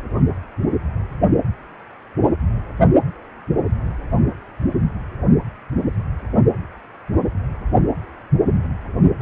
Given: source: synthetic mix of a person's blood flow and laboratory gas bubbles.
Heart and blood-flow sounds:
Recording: Doppler ultrasound of blood flow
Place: precordium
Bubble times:
9.20-9.22 s: bubbles
From the record:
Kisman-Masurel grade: 223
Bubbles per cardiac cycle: several, 3 to 8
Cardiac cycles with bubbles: 10 to 50%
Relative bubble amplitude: loud (0.450 to 0.775)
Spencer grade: 2 (many but less than half of the cardiac periods contain bubble signals, singularly or in groups)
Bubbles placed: only in the low amplitude regions of the cardiac cycle

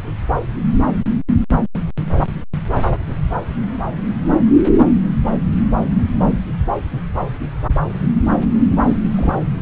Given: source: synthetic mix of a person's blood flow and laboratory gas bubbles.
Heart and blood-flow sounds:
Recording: Doppler ultrasound of blood flow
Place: subclavian vein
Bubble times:
8.89-8.97 s: bubbles
9.15-9.39 s: bubbles
From the record:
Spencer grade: 1 (occasional bubble signal discernible with the cardiac motion signal, with majority of cardiac periods free of bubbles)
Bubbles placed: anywhere in the cardiac cycle

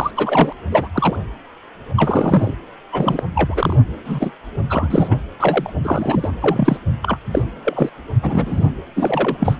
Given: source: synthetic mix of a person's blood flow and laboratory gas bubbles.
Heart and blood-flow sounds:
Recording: Doppler ultrasound of blood flow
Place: precordium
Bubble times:
0.00-0.11 s: bubbles
0.17-0.52 s: bubbles
0.71-0.88 s: bubbles
0.94-1.16 s: bubbles
1.96-2.54 s: bubbles
2.92-3.23 s: bubbles
3.35-3.76 s: bubbles
4.05-4.32 s: bubbles
4.70-5.17 s: bubbles
5.40-5.70 s: bubbles
5.82-6.30 s: bubbles
6.41-6.78 s: bubbles
7.02-7.17 s: bubbles
7.31-7.43 s: bubbles
7.65-7.90 s: bubbles
8.22-8.68 s: bubbles
8.96-9.56 s: bubbles
From the record:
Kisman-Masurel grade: 233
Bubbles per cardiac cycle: several, 3 to 8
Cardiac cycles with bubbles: 50 to 99%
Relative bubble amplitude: loud (0.450 to 0.775)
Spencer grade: 3 (all of the cardiac periods contain showers or single bubble signals, but not dominating or overriding the cardiac motion signals)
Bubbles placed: anywhere in the cardiac cycle

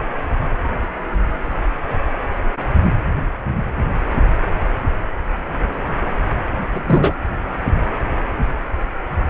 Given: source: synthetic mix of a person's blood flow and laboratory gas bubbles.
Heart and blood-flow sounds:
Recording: Doppler ultrasound of blood flow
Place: precordium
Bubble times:
6.70-7.14 s: bubbles
From the record:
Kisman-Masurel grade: 113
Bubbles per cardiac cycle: 1 to 2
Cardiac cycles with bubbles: 1 to 10%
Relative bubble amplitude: loud (0.450 to 0.775)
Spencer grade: 1 (occasional bubble signal discernible with the cardiac motion signal, with majority of cardiac periods free of bubbles)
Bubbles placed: anywhere in the cardiac cycle

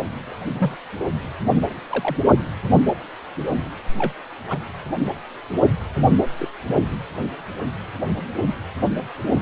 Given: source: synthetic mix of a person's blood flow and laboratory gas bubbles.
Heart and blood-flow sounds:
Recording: Doppler ultrasound of blood flow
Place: precordium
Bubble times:
0.55-0.77 s: bubbles
1.90-2.17 s: bubbles
2.72-2.83 s: bubbles
3.98-4.12 s: bubbles
4.47-4.58 s: bubbles
6.38-6.48 s: bubbles
From the record:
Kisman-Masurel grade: 121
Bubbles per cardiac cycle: 1 to 2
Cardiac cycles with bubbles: 10 to 50%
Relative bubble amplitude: barely perceptible (0.100 to 0.250)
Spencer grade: 2 (many but less than half of the cardiac periods contain bubble signals, singularly or in groups)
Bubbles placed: only in the low amplitude regions of the cardiac cycle

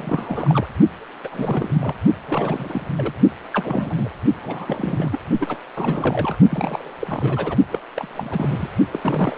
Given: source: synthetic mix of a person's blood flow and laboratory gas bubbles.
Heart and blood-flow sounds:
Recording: Doppler ultrasound of blood flow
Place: precordium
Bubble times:
0.00-0.67 s: bubbles
1.24-1.28 s: bubbles
1.31-1.95 s: bubbles
2.28-3.12 s: bubbles
3.53-4.08 s: bubbles
4.42-5.20 s: bubbles
5.40-5.57 s: bubbles
5.75-6.36 s: bubbles
6.50-6.94 s: bubbles
7.00-7.57 s: bubbles
7.70-7.79 s: bubbles
7.96-8.08 s: bubbles
8.13-8.69 s: bubbles
8.91-9.01 s: bubbles
9.03-9.38 s: bubbles
From the record:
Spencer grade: 3 (all of the cardiac periods contain showers or single bubble signals, but not dominating or overriding the cardiac motion signals)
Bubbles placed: only in the low amplitude regions of the cardiac cycle

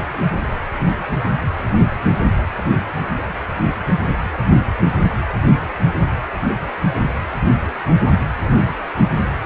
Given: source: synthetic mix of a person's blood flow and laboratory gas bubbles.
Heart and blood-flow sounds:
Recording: Doppler ultrasound of blood flow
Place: precordium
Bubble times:
no bubbles
From the record:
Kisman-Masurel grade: 000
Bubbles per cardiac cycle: 0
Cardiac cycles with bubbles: 0%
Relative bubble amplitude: no bubbles discernible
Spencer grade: 0 (complete lack of bubble signals)

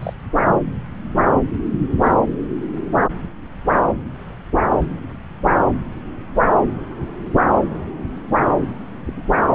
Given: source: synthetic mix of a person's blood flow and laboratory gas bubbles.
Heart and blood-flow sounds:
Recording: Doppler ultrasound of blood flow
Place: subclavian vein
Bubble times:
0.01-0.13 s: bubbles
1.98-2.17 s: bubbles
9.06-9.13 s: bubbles
9.16-9.23 s: bubbles
From the record:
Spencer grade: 2 (many but less than half of the cardiac periods contain bubble signals, singularly or in groups)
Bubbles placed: anywhere in the cardiac cycle

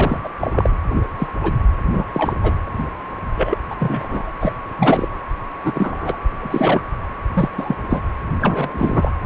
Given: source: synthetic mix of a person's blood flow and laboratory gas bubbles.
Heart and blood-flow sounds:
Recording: Doppler ultrasound of blood flow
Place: precordium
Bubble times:
0.00-0.21 s: bubbles
0.24-0.29 s: bubbles
0.40-0.70 s: bubbles
0.96-1.01 s: bubbles
1.18-1.28 s: bubbles
1.43-1.52 s: bubbles
1.93-2.04 s: bubbles
2.13-2.33 s: bubbles
2.42-2.55 s: bubbles
3.34-3.58 s: bubbles
3.70-3.76 s: bubbles
3.79-4.33 s: bubbles
4.40-4.54 s: bubbles
4.78-5.08 s: bubbles
5.63-6.16 s: bubbles
6.39-6.81 s: bubbles
7.33-7.48 s: bubbles
7.58-7.77 s: bubbles
7.89-8.02 s: bubbles
8.40-9.11 s: bubbles
9.23-9.26 s: bubbles
From the record:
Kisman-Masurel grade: 243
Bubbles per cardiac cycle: several, 3 to 8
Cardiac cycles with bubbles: 100%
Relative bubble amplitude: loud (0.450 to 0.775)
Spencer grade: 3 (all of the cardiac periods contain showers or single bubble signals, but not dominating or overriding the cardiac motion signals)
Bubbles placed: anywhere in the cardiac cycle

